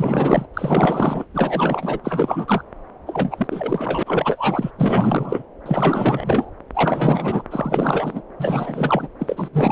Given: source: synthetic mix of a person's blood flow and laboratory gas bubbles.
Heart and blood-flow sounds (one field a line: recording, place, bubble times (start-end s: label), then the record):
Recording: Doppler ultrasound of blood flow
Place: subclavian vein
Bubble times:
0.00-0.46 s: bubbles
0.54-1.24 s: bubbles
1.33-1.99 s: bubbles
2.04-2.63 s: bubbles
3.06-3.47 s: bubbles
3.51-4.03 s: bubbles
4.05-4.71 s: bubbles
4.78-5.43 s: bubbles
5.65-6.50 s: bubbles
6.74-7.43 s: bubbles
7.50-8.23 s: bubbles
8.40-9.08 s: bubbles
9.19-9.49 s: bubbles
9.53-9.72 s: bubbles
From the record:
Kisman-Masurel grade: 444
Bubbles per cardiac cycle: continuous sound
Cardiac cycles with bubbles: 100%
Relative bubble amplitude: maximal (0.775 to 0.999)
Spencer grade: 4 (maximum detectable bubble signal sounding continuously throughout systole and diastole of every cardiac period, and overriding the amplitude of the normal cardiac signals)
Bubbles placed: anywhere in the cardiac cycle